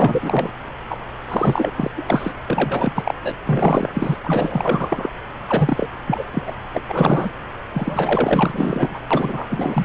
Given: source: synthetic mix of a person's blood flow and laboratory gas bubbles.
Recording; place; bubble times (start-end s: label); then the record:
Doppler ultrasound of blood flow; subclavian vein
0.00-0.50 s: bubbles
0.89-1.01 s: bubbles
1.28-1.71 s: bubbles
1.76-1.91 s: bubbles
1.97-2.03 s: bubbles
2.06-2.31 s: bubbles
2.42-2.44 s: bubbles
2.47-2.92 s: bubbles
2.94-3.02 s: bubbles
3.05-3.14 s: bubbles
3.23-3.31 s: bubbles
3.46-4.17 s: bubbles
4.24-5.09 s: bubbles
5.47-5.88 s: bubbles
6.06-6.25 s: bubbles
6.32-6.51 s: bubbles
6.74-6.80 s: bubbles
6.88-7.30 s: bubbles
7.74-9.00 s: bubbles
9.11-9.46 s: bubbles
9.50-9.85 s: bubbles
From the record:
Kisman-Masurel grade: 444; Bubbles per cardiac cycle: continuous sound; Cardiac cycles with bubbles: 100%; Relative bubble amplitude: maximal (0.775 to 0.999); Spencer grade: 4 (maximum detectable bubble signal sounding continuously throughout systole and diastole of every cardiac period, and overriding the amplitude of the normal cardiac signals); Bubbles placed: anywhere in the cardiac cycle